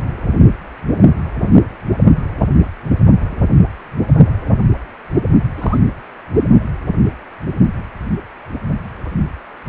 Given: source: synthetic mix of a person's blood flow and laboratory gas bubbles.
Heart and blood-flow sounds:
Doppler ultrasound of blood flow; precordium
5.58-5.78 s: bubbles
From the record:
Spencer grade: 1 (occasional bubble signal discernible with the cardiac motion signal, with majority of cardiac periods free of bubbles); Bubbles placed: only in the low amplitude regions of the cardiac cycle

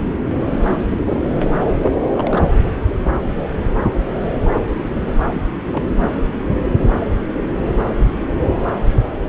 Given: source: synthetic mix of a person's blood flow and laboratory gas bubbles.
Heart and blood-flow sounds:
Doppler ultrasound of blood flow; subclavian vein
0.91-0.97 s: bubbles
1.06-1.19 s: bubbles
2.13-2.42 s: bubbles
5.29-5.42 s: bubbles
5.73-5.83 s: bubbles
From the record:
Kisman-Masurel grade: 121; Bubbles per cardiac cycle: 1 to 2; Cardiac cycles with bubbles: 10 to 50%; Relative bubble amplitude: barely perceptible (0.100 to 0.250); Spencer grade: 2 (many but less than half of the cardiac periods contain bubble signals, singularly or in groups); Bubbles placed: anywhere in the cardiac cycle

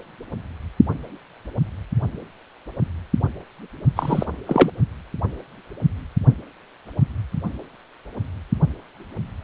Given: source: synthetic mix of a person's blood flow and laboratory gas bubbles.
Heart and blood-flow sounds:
Doppler ultrasound of blood flow; precordium
3.96-4.25 s: bubbles
4.46-4.70 s: bubbles
From the record:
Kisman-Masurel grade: 223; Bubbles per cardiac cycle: several, 3 to 8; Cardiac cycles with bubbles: 10 to 50%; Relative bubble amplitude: loud (0.450 to 0.775); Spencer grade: 2 (many but less than half of the cardiac periods contain bubble signals, singularly or in groups); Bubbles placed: only in the low amplitude regions of the cardiac cycle

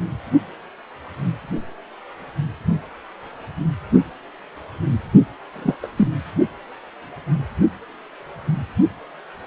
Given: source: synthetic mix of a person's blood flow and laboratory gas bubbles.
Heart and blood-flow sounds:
Doppler ultrasound of blood flow; precordium
5.52-5.75 s: bubbles
5.83-5.88 s: bubbles
5.96-6.08 s: bubbles
From the record:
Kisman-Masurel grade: 212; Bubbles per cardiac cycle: several, 3 to 8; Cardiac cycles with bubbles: 1 to 10%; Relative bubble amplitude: moderate (0.250 to 0.450); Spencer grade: 1 (occasional bubble signal discernible with the cardiac motion signal, with majority of cardiac periods free of bubbles); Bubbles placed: only in the low amplitude regions of the cardiac cycle

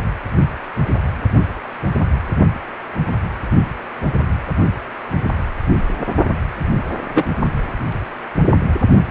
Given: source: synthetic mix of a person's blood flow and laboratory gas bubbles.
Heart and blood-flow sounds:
Doppler ultrasound of blood flow; precordium
7.14-7.24 s: bubbles
From the record:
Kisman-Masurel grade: 113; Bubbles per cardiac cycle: 1 to 2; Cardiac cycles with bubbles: 1 to 10%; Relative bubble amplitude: loud (0.450 to 0.775); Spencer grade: 1 (occasional bubble signal discernible with the cardiac motion signal, with majority of cardiac periods free of bubbles); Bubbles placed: only in the low amplitude regions of the cardiac cycle

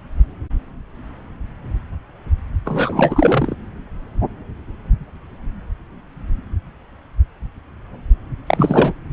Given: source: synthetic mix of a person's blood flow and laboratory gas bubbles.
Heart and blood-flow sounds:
Doppler ultrasound of blood flow; subclavian vein
2.65-3.56 s: bubbles
8.46-8.93 s: bubbles
From the record:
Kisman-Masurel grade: 223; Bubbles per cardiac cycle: several, 3 to 8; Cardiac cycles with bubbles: 10 to 50%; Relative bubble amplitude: loud (0.450 to 0.775); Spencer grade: 2 (many but less than half of the cardiac periods contain bubble signals, singularly or in groups); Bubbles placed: anywhere in the cardiac cycle

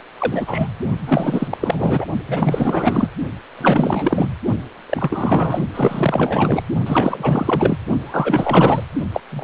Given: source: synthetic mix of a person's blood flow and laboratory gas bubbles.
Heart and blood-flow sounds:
Doppler ultrasound of blood flow; precordium
0.19-0.67 s: bubbles
1.05-1.48 s: bubbles
1.50-1.57 s: bubbles
1.60-2.05 s: bubbles
2.28-3.08 s: bubbles
3.58-4.29 s: bubbles
4.89-5.69 s: bubbles
5.73-6.63 s: bubbles
6.86-7.78 s: bubbles
8.04-8.84 s: bubbles
9.13-9.21 s: bubbles
9.31-9.44 s: bubbles
From the record:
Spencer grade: 4 (maximum detectable bubble signal sounding continuously throughout systole and diastole of every cardiac period, and overriding the amplitude of the normal cardiac signals); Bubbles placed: only in the low amplitude regions of the cardiac cycle

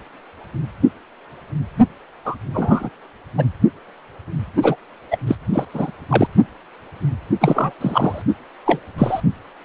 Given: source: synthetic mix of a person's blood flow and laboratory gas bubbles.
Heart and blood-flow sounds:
Doppler ultrasound of blood flow; precordium
2.24-2.35 s: bubbles
2.54-2.90 s: bubbles
3.38-3.45 s: bubbles
4.62-4.76 s: bubbles
5.10-5.18 s: bubbles
5.27-5.35 s: bubbles
5.52-5.65 s: bubbles
5.73-5.92 s: bubbles
6.09-6.27 s: bubbles
7.41-7.73 s: bubbles
7.80-8.22 s: bubbles
8.65-8.79 s: bubbles
8.98-9.21 s: bubbles
From the record:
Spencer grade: 2 (many but less than half of the cardiac periods contain bubble signals, singularly or in groups); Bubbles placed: only in the low amplitude regions of the cardiac cycle

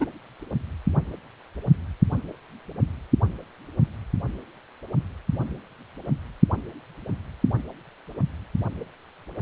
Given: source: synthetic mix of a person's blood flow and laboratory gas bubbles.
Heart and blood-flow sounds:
Doppler ultrasound of blood flow; precordium
0.00-0.06 s: bubbles
From the record:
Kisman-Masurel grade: 112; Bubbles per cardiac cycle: 1 to 2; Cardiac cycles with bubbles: 1 to 10%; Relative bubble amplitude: moderate (0.250 to 0.450); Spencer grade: 1 (occasional bubble signal discernible with the cardiac motion signal, with majority of cardiac periods free of bubbles); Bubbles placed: anywhere in the cardiac cycle

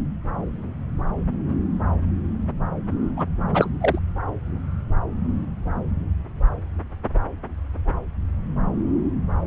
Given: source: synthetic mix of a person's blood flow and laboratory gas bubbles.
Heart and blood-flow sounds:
Doppler ultrasound of blood flow; subclavian vein
3.17-3.24 s: bubbles
3.54-3.69 s: bubbles
3.81-3.99 s: bubbles
From the record:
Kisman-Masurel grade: 213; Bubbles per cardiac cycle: several, 3 to 8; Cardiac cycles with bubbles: 1 to 10%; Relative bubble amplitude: loud (0.450 to 0.775); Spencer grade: 1 (occasional bubble signal discernible with the cardiac motion signal, with majority of cardiac periods free of bubbles); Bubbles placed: anywhere in the cardiac cycle

